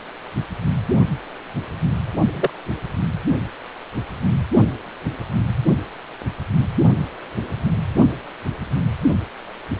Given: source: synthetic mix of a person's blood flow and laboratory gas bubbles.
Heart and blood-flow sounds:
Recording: Doppler ultrasound of blood flow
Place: precordium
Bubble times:
2.33-2.50 s: bubbles
From the record:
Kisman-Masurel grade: 113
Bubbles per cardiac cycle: 1 to 2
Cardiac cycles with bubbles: 1 to 10%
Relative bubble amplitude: loud (0.450 to 0.775)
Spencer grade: 1 (occasional bubble signal discernible with the cardiac motion signal, with majority of cardiac periods free of bubbles)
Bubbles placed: only in the low amplitude regions of the cardiac cycle

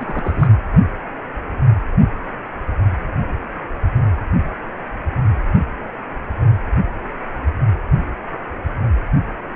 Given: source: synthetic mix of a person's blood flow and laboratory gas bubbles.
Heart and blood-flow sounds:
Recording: Doppler ultrasound of blood flow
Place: precordium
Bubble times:
0.00-0.55 s: bubbles
From the record:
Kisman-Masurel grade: 211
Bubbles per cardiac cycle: several, 3 to 8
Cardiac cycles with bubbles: 1 to 10%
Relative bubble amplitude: barely perceptible (0.100 to 0.250)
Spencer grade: 1 (occasional bubble signal discernible with the cardiac motion signal, with majority of cardiac periods free of bubbles)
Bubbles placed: anywhere in the cardiac cycle

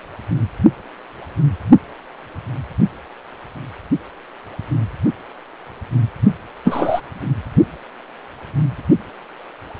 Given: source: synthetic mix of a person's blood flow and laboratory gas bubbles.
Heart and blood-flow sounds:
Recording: Doppler ultrasound of blood flow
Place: precordium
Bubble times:
6.65-7.01 s: bubbles
From the record:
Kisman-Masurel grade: 113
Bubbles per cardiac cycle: 1 to 2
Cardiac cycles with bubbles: 1 to 10%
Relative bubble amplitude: loud (0.450 to 0.775)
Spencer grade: 1 (occasional bubble signal discernible with the cardiac motion signal, with majority of cardiac periods free of bubbles)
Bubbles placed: only in the low amplitude regions of the cardiac cycle

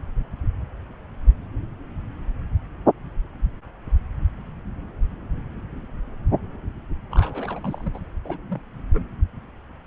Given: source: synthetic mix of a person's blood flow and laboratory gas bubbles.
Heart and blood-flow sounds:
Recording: Doppler ultrasound of blood flow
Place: subclavian vein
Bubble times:
7.11-7.99 s: bubbles
8.24-8.40 s: bubbles
8.48-8.62 s: bubbles
8.93-9.04 s: bubbles
From the record:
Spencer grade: 2 (many but less than half of the cardiac periods contain bubble signals, singularly or in groups)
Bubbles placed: anywhere in the cardiac cycle

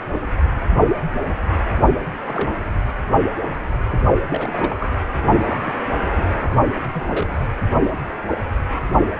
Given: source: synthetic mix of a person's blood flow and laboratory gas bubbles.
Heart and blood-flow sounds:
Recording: Doppler ultrasound of blood flow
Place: precordium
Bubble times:
2.26-2.52 s: bubbles
3.91-3.98 s: bubbles
4.17-4.21 s: bubbles
4.29-4.76 s: bubbles
4.79-4.94 s: bubbles
5.35-5.40 s: bubbles
5.46-5.74 s: bubbles
6.16-6.33 s: bubbles
6.41-6.64 s: bubbles
6.75-6.80 s: bubbles
6.93-7.37 s: bubbles
From the record:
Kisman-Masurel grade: 221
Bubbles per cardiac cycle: several, 3 to 8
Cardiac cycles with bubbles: 10 to 50%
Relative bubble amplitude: barely perceptible (0.100 to 0.250)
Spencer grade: 2 (many but less than half of the cardiac periods contain bubble signals, singularly or in groups)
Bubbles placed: anywhere in the cardiac cycle

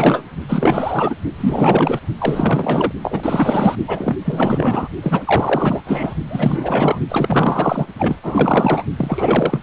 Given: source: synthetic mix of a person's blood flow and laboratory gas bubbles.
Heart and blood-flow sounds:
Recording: Doppler ultrasound of blood flow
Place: precordium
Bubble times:
0.00-0.24 s: bubbles
0.48-1.16 s: bubbles
1.38-1.99 s: bubbles
2.18-2.92 s: bubbles
3.03-3.76 s: bubbles
3.87-4.17 s: bubbles
4.25-4.88 s: bubbles
5.02-5.80 s: bubbles
5.87-6.14 s: bubbles
6.29-7.00 s: bubbles
7.08-7.87 s: bubbles
7.98-8.19 s: bubbles
8.22-8.84 s: bubbles
8.97-9.59 s: bubbles
From the record:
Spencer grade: 4 (maximum detectable bubble signal sounding continuously throughout systole and diastole of every cardiac period, and overriding the amplitude of the normal cardiac signals)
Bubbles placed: only in the low amplitude regions of the cardiac cycle

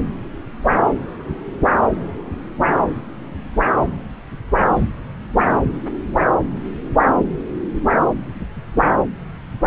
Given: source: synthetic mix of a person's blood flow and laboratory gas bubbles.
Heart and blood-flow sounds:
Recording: Doppler ultrasound of blood flow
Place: subclavian vein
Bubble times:
no bubbles
From the record:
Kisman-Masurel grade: 000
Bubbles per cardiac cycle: 0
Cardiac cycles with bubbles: 0%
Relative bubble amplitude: no bubbles discernible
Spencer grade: 0 (complete lack of bubble signals)

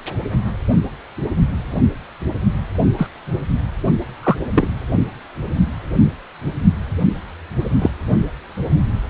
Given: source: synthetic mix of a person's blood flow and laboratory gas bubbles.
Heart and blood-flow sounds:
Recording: Doppler ultrasound of blood flow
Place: precordium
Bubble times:
2.98-3.08 s: bubbles
4.23-4.37 s: bubbles
4.55-4.67 s: bubbles
7.81-7.90 s: bubbles
From the record:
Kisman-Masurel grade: 123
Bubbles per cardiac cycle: 1 to 2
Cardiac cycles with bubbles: 10 to 50%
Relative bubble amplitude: loud (0.450 to 0.775)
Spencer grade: 2 (many but less than half of the cardiac periods contain bubble signals, singularly or in groups)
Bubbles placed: only in the low amplitude regions of the cardiac cycle

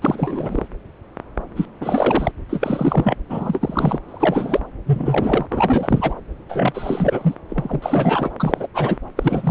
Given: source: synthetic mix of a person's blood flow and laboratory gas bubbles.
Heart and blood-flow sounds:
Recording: Doppler ultrasound of blood flow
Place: subclavian vein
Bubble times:
0.01-0.67 s: bubbles
1.56-1.66 s: bubbles
1.80-2.31 s: bubbles
2.49-3.17 s: bubbles
3.29-3.99 s: bubbles
4.08-4.60 s: bubbles
4.86-5.46 s: bubbles
5.50-6.14 s: bubbles
6.49-7.35 s: bubbles
7.50-8.31 s: bubbles
8.39-8.67 s: bubbles
8.73-8.98 s: bubbles
9.16-9.51 s: bubbles
From the record:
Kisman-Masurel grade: 332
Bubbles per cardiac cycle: rolling drumbeat, 9 or more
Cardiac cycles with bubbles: 50 to 99%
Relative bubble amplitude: moderate (0.250 to 0.450)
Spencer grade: 3 (all of the cardiac periods contain showers or single bubble signals, but not dominating or overriding the cardiac motion signals)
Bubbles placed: anywhere in the cardiac cycle

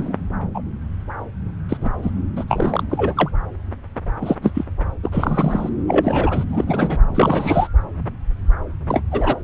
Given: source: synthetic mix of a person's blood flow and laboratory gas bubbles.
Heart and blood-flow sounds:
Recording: Doppler ultrasound of blood flow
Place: subclavian vein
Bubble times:
0.00-0.14 s: bubbles
0.54-0.62 s: bubbles
1.69-1.77 s: bubbles
1.81-1.90 s: bubbles
2.02-2.12 s: bubbles
2.36-2.45 s: bubbles
2.48-2.83 s: bubbles
2.90-3.31 s: bubbles
4.21-4.35 s: bubbles
4.42-4.51 s: bubbles
4.54-4.65 s: bubbles
5.03-5.70 s: bubbles
5.87-6.45 s: bubbles
6.48-7.00 s: bubbles
7.15-7.68 s: bubbles
8.88-9.02 s: bubbles
9.12-9.37 s: bubbles
From the record:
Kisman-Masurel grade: 233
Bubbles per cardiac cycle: several, 3 to 8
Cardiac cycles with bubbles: 50 to 99%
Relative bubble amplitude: loud (0.450 to 0.775)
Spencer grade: 3 (all of the cardiac periods contain showers or single bubble signals, but not dominating or overriding the cardiac motion signals)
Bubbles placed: anywhere in the cardiac cycle

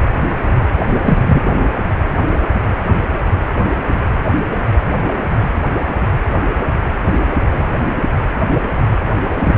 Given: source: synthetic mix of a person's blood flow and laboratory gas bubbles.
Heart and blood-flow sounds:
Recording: Doppler ultrasound of blood flow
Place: precordium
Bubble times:
1.04-1.42 s: bubbles
9.30-9.58 s: bubbles
From the record:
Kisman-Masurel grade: 113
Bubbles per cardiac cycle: 1 to 2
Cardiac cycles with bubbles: 1 to 10%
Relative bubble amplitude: loud (0.450 to 0.775)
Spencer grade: 1 (occasional bubble signal discernible with the cardiac motion signal, with majority of cardiac periods free of bubbles)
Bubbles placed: anywhere in the cardiac cycle

